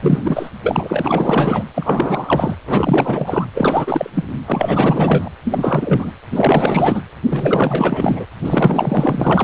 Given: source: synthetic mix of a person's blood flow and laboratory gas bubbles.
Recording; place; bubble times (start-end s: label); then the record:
Doppler ultrasound of blood flow; precordium
0.02-0.50 s: bubbles
0.64-1.64 s: bubbles
1.74-2.56 s: bubbles
2.67-3.45 s: bubbles
3.54-4.10 s: bubbles
4.15-4.24 s: bubbles
4.46-5.29 s: bubbles
5.45-6.12 s: bubbles
6.32-7.04 s: bubbles
7.29-8.25 s: bubbles
8.42-9.44 s: bubbles
From the record:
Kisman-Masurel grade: 444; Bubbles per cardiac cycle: continuous sound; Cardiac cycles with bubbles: 100%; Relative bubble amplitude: maximal (0.775 to 0.999); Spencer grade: 4 (maximum detectable bubble signal sounding continuously throughout systole and diastole of every cardiac period, and overriding the amplitude of the normal cardiac signals); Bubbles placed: anywhere in the cardiac cycle